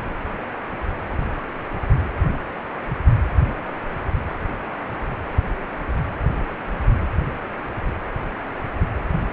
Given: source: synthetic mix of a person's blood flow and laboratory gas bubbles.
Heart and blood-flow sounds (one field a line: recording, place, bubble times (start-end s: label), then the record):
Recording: Doppler ultrasound of blood flow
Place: precordium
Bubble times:
no bubbles
From the record:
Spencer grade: 0 (complete lack of bubble signals)